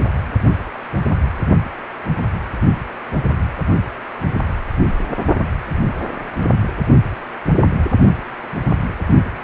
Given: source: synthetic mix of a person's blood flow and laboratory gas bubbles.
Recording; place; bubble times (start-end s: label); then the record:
Doppler ultrasound of blood flow; precordium
no bubbles
From the record:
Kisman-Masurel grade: 000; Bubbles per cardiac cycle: 0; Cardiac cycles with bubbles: 0%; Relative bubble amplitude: no bubbles discernible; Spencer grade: 0 (complete lack of bubble signals)